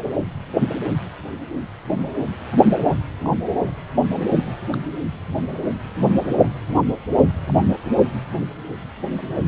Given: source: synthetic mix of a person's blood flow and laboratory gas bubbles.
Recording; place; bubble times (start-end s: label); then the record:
Doppler ultrasound of blood flow; precordium
3.24-3.32 s: bubbles
3.66-3.71 s: bubbles
4.73-4.77 s: bubbles
7.48-7.54 s: bubbles
9.35-9.45 s: bubbles
From the record:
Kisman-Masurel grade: 121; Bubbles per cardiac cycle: 1 to 2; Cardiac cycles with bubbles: 10 to 50%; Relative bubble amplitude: barely perceptible (0.100 to 0.250); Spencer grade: 2 (many but less than half of the cardiac periods contain bubble signals, singularly or in groups); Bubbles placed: anywhere in the cardiac cycle